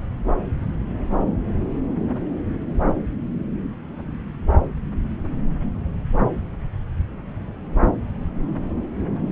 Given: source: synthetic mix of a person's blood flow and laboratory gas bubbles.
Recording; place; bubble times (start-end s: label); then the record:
Doppler ultrasound of blood flow; subclavian vein
no bubbles
From the record:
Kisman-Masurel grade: 000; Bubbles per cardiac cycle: 0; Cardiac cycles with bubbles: 0%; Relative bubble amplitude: no bubbles discernible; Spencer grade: 0 (complete lack of bubble signals)